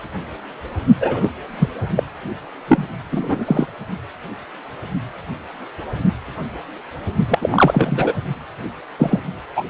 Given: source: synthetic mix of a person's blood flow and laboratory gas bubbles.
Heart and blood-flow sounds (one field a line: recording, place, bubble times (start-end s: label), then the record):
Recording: Doppler ultrasound of blood flow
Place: precordium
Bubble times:
1.00-1.31 s: bubbles
1.59-1.69 s: bubbles
1.96-2.04 s: bubbles
2.68-2.85 s: bubbles
3.10-3.67 s: bubbles
7.28-8.13 s: bubbles
8.99-9.23 s: bubbles
9.56-9.64 s: bubbles
From the record:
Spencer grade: 2 (many but less than half of the cardiac periods contain bubble signals, singularly or in groups)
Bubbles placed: only in the low amplitude regions of the cardiac cycle